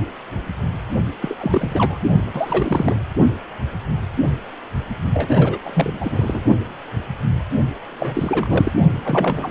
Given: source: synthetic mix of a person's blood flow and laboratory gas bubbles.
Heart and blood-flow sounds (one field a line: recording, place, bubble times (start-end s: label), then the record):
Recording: Doppler ultrasound of blood flow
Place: precordium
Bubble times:
1.22-1.97 s: bubbles
2.34-2.95 s: bubbles
5.14-5.59 s: bubbles
5.62-6.42 s: bubbles
7.88-8.72 s: bubbles
9.04-9.50 s: bubbles
From the record:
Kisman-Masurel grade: 332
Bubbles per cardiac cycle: rolling drumbeat, 9 or more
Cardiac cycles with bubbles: 50 to 99%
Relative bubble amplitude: moderate (0.250 to 0.450)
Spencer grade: 3 (all of the cardiac periods contain showers or single bubble signals, but not dominating or overriding the cardiac motion signals)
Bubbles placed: only in the low amplitude regions of the cardiac cycle